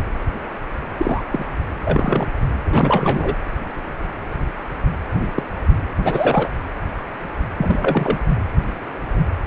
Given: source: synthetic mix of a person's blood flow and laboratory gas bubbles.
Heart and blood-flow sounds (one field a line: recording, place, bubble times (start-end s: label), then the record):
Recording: Doppler ultrasound of blood flow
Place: precordium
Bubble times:
0.97-1.23 s: bubbles
1.30-1.46 s: bubbles
1.85-2.27 s: bubbles
2.65-3.35 s: bubbles
5.14-5.28 s: bubbles
5.34-5.43 s: bubbles
6.04-6.49 s: bubbles
7.57-8.19 s: bubbles
From the record:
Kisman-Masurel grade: 223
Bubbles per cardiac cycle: several, 3 to 8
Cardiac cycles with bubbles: 10 to 50%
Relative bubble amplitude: loud (0.450 to 0.775)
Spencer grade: 2 (many but less than half of the cardiac periods contain bubble signals, singularly or in groups)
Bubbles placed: anywhere in the cardiac cycle